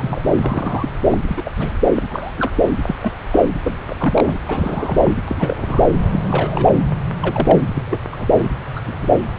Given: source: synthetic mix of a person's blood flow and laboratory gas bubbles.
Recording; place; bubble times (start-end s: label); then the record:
Doppler ultrasound of blood flow; subclavian vein
0.00-0.22 s: bubbles
0.37-0.89 s: bubbles
1.11-1.18 s: bubbles
1.28-1.52 s: bubbles
1.56-1.79 s: bubbles
1.95-2.02 s: bubbles
2.10-2.33 s: bubbles
2.38-2.52 s: bubbles
2.56-2.74 s: bubbles
2.87-2.95 s: bubbles
3.02-3.11 s: bubbles
3.31-3.39 s: bubbles
3.64-3.78 s: bubbles
3.86-3.96 s: bubbles
3.99-4.39 s: bubbles
4.45-5.13 s: bubbles
5.27-5.82 s: bubbles
6.12-6.20 s: bubbles
6.26-6.73 s: bubbles
7.21-7.61 s: bubbles
7.74-7.82 s: bubbles
7.88-7.99 s: bubbles
8.12-8.16 s: bubbles
8.19-8.28 s: bubbles
8.38-8.49 s: bubbles
8.76-8.80 s: bubbles
8.87-8.94 s: bubbles
9.02-9.08 s: bubbles
From the record:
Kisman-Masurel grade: 242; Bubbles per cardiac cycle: several, 3 to 8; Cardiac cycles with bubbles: 100%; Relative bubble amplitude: moderate (0.250 to 0.450); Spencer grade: 3 (all of the cardiac periods contain showers or single bubble signals, but not dominating or overriding the cardiac motion signals); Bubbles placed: anywhere in the cardiac cycle